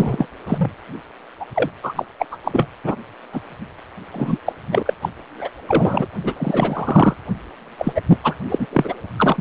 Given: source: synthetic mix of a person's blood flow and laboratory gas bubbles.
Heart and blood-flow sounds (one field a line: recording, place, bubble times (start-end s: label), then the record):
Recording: Doppler ultrasound of blood flow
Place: precordium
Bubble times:
0.00-0.26 s: bubbles
0.47-0.71 s: bubbles
1.39-1.46 s: bubbles
1.55-1.70 s: bubbles
1.82-2.05 s: bubbles
2.19-2.26 s: bubbles
2.31-2.38 s: bubbles
2.44-2.68 s: bubbles
2.83-2.96 s: bubbles
3.32-3.41 s: bubbles
4.13-4.38 s: bubbles
4.46-4.52 s: bubbles
4.71-4.83 s: bubbles
4.85-4.93 s: bubbles
5.01-5.09 s: bubbles
5.38-5.50 s: bubbles
5.68-6.05 s: bubbles
6.23-6.33 s: bubbles
6.36-7.16 s: bubbles
7.78-8.02 s: bubbles
8.10-8.18 s: bubbles
8.24-8.36 s: bubbles
8.49-8.67 s: bubbles
8.73-8.99 s: bubbles
9.18-9.41 s: bubbles
From the record:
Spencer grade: 3 (all of the cardiac periods contain showers or single bubble signals, but not dominating or overriding the cardiac motion signals)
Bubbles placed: anywhere in the cardiac cycle